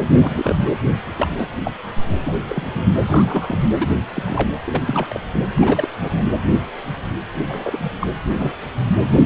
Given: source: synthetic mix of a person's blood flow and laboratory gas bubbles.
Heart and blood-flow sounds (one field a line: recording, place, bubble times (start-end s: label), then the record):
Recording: Doppler ultrasound of blood flow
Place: precordium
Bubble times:
0.21-0.57 s: bubbles
0.62-0.71 s: bubbles
1.17-1.35 s: bubbles
1.38-1.53 s: bubbles
1.64-1.72 s: bubbles
2.21-2.32 s: bubbles
2.49-2.82 s: bubbles
3.00-3.58 s: bubbles
3.80-3.88 s: bubbles
4.13-4.52 s: bubbles
4.64-4.82 s: bubbles
4.86-5.20 s: bubbles
5.35-5.45 s: bubbles
5.57-5.89 s: bubbles
6.00-6.30 s: bubbles
7.49-7.91 s: bubbles
7.99-8.08 s: bubbles
8.34-8.52 s: bubbles
9.00-9.06 s: bubbles
9.11-9.26 s: bubbles
From the record:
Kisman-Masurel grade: 232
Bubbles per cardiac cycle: several, 3 to 8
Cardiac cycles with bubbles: 50 to 99%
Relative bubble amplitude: moderate (0.250 to 0.450)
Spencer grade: 3 (all of the cardiac periods contain showers or single bubble signals, but not dominating or overriding the cardiac motion signals)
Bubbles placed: anywhere in the cardiac cycle